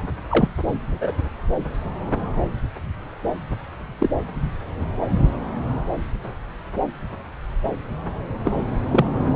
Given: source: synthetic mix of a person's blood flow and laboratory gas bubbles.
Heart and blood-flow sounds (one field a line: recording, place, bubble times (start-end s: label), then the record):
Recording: Doppler ultrasound of blood flow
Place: subclavian vein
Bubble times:
0.30-0.48 s: bubbles
0.85-1.12 s: bubbles
4.00-4.10 s: bubbles
8.45-8.53 s: bubbles
8.91-9.05 s: bubbles
From the record:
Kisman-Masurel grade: 123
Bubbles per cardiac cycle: 1 to 2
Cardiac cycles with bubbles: 10 to 50%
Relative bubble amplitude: loud (0.450 to 0.775)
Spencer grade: 2 (many but less than half of the cardiac periods contain bubble signals, singularly or in groups)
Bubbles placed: anywhere in the cardiac cycle